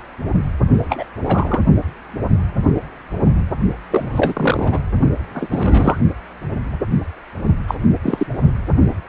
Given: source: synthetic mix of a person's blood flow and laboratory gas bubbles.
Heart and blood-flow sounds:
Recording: Doppler ultrasound of blood flow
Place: precordium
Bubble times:
0.89-1.06 s: bubbles
1.16-1.60 s: bubbles
3.90-4.09 s: bubbles
4.12-4.79 s: bubbles
5.33-5.48 s: bubbles
5.50-5.97 s: bubbles
7.67-7.75 s: bubbles
8.03-8.27 s: bubbles
From the record:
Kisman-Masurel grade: 223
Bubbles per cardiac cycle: several, 3 to 8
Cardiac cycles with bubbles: 10 to 50%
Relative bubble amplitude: loud (0.450 to 0.775)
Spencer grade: 2 (many but less than half of the cardiac periods contain bubble signals, singularly or in groups)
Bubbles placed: only in the low amplitude regions of the cardiac cycle

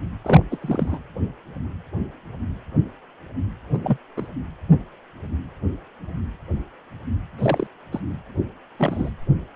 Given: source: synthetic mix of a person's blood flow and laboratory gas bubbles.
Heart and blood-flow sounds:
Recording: Doppler ultrasound of blood flow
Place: precordium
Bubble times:
0.24-0.45 s: bubbles
0.51-0.57 s: bubbles
0.60-0.98 s: bubbles
3.73-3.79 s: bubbles
3.83-3.98 s: bubbles
4.16-4.28 s: bubbles
7.38-7.67 s: bubbles
7.92-8.00 s: bubbles
8.78-9.11 s: bubbles
From the record:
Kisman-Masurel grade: 222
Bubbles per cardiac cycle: several, 3 to 8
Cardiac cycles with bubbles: 10 to 50%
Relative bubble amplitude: moderate (0.250 to 0.450)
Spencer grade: 2 (many but less than half of the cardiac periods contain bubble signals, singularly or in groups)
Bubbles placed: anywhere in the cardiac cycle

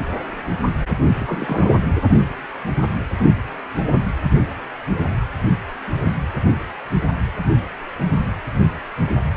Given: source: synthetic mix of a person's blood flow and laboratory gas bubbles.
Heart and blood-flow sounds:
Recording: Doppler ultrasound of blood flow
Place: precordium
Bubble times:
1.20-1.75 s: bubbles
From the record:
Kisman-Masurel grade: 212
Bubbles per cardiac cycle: several, 3 to 8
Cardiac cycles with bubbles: 1 to 10%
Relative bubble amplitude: moderate (0.250 to 0.450)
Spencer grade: 1 (occasional bubble signal discernible with the cardiac motion signal, with majority of cardiac periods free of bubbles)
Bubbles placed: anywhere in the cardiac cycle

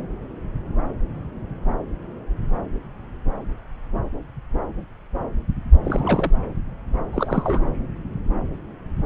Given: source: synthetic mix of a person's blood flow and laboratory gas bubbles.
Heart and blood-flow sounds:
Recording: Doppler ultrasound of blood flow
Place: subclavian vein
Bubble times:
5.84-6.32 s: bubbles
7.13-7.60 s: bubbles
From the record:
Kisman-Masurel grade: 222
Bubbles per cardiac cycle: several, 3 to 8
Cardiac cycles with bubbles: 10 to 50%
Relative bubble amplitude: moderate (0.250 to 0.450)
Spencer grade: 2 (many but less than half of the cardiac periods contain bubble signals, singularly or in groups)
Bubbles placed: anywhere in the cardiac cycle

